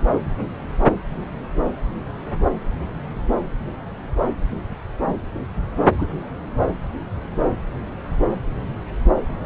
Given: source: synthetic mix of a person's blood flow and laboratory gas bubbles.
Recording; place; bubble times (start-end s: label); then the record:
Doppler ultrasound of blood flow; subclavian vein
5.97-6.06 s: bubbles
From the record:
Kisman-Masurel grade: 113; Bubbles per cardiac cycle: 1 to 2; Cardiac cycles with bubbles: 1 to 10%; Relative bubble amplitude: loud (0.450 to 0.775); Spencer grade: 1 (occasional bubble signal discernible with the cardiac motion signal, with majority of cardiac periods free of bubbles); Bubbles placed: anywhere in the cardiac cycle